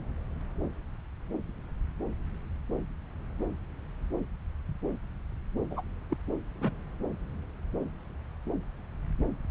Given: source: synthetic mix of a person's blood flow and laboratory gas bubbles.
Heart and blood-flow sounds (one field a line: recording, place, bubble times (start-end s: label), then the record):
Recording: Doppler ultrasound of blood flow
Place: subclavian vein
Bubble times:
5.71-5.82 s: bubbles
6.11-6.17 s: bubbles
6.61-6.71 s: bubbles
From the record:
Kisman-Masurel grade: 221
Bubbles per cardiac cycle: several, 3 to 8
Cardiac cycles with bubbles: 10 to 50%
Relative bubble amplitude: barely perceptible (0.100 to 0.250)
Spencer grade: 2 (many but less than half of the cardiac periods contain bubble signals, singularly or in groups)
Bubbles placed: anywhere in the cardiac cycle